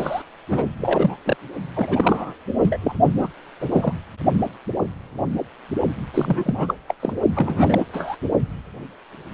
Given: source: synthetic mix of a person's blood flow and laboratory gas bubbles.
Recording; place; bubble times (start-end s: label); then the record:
Doppler ultrasound of blood flow; precordium
0.00-0.22 s: bubbles
0.49-0.68 s: bubbles
0.81-1.17 s: bubbles
1.25-1.36 s: bubbles
1.75-2.35 s: bubbles
2.62-2.77 s: bubbles
2.82-2.93 s: bubbles
3.18-3.28 s: bubbles
3.60-3.67 s: bubbles
3.70-3.94 s: bubbles
6.14-6.75 s: bubbles
6.88-6.94 s: bubbles
7.00-7.13 s: bubbles
7.35-7.85 s: bubbles
7.93-8.17 s: bubbles
From the record:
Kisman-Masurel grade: 232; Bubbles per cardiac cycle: several, 3 to 8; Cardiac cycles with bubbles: 50 to 99%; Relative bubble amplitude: moderate (0.250 to 0.450); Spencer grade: 3 (all of the cardiac periods contain showers or single bubble signals, but not dominating or overriding the cardiac motion signals); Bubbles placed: only in the low amplitude regions of the cardiac cycle